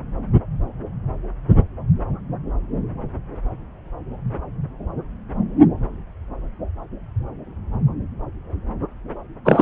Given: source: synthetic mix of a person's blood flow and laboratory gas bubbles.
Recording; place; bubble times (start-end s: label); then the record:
Doppler ultrasound of blood flow; subclavian vein
9.45-9.62 s: bubbles
From the record:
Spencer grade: 1 (occasional bubble signal discernible with the cardiac motion signal, with majority of cardiac periods free of bubbles); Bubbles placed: anywhere in the cardiac cycle